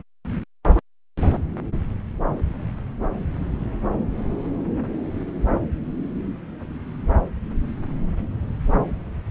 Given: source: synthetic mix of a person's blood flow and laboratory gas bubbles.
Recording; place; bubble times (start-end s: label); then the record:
Doppler ultrasound of blood flow; subclavian vein
no bubbles
From the record:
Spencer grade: 0 (complete lack of bubble signals)